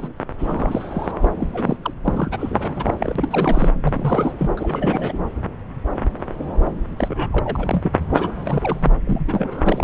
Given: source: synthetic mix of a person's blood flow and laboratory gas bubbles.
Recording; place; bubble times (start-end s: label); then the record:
Doppler ultrasound of blood flow; subclavian vein
0.00-0.08 s: bubbles
0.38-1.12 s: bubbles
1.21-1.28 s: bubbles
1.40-1.76 s: bubbles
1.82-1.94 s: bubbles
2.04-2.29 s: bubbles
2.31-3.71 s: bubbles
3.83-4.32 s: bubbles
4.39-4.50 s: bubbles
4.57-5.19 s: bubbles
6.97-7.92 s: bubbles
8.10-8.95 s: bubbles
9.07-9.84 s: bubbles
From the record:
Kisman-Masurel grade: 332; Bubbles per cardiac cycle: rolling drumbeat, 9 or more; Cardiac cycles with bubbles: 50 to 99%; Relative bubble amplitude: moderate (0.250 to 0.450); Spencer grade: 3 (all of the cardiac periods contain showers or single bubble signals, but not dominating or overriding the cardiac motion signals); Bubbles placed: anywhere in the cardiac cycle